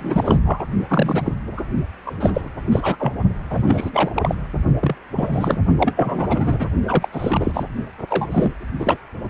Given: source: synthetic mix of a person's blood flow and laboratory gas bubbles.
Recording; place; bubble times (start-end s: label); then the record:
Doppler ultrasound of blood flow; precordium
0.00-0.39 s: bubbles
0.44-0.63 s: bubbles
0.90-1.35 s: bubbles
1.57-1.61 s: bubbles
2.06-2.16 s: bubbles
2.20-2.49 s: bubbles
2.71-3.12 s: bubbles
3.50-3.63 s: bubbles
3.68-3.90 s: bubbles
3.92-4.11 s: bubbles
4.14-4.35 s: bubbles
4.80-4.95 s: bubbles
5.16-5.61 s: bubbles
5.78-6.70 s: bubbles
6.87-7.08 s: bubbles
7.12-7.63 s: bubbles
8.10-8.54 s: bubbles
8.79-8.97 s: bubbles
From the record:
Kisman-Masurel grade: 343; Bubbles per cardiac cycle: rolling drumbeat, 9 or more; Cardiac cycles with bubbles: 100%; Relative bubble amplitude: loud (0.450 to 0.775); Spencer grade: 3 (all of the cardiac periods contain showers or single bubble signals, but not dominating or overriding the cardiac motion signals); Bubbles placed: only in the low amplitude regions of the cardiac cycle